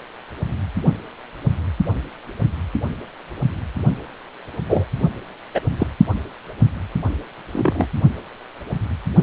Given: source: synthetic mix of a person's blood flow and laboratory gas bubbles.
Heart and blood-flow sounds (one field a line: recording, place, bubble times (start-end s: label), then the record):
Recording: Doppler ultrasound of blood flow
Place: precordium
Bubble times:
4.69-4.86 s: bubbles
5.54-5.60 s: bubbles
5.79-5.87 s: bubbles
7.53-7.86 s: bubbles
From the record:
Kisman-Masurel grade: 123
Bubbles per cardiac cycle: 1 to 2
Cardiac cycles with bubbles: 10 to 50%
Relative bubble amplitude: loud (0.450 to 0.775)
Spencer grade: 2 (many but less than half of the cardiac periods contain bubble signals, singularly or in groups)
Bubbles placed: only in the low amplitude regions of the cardiac cycle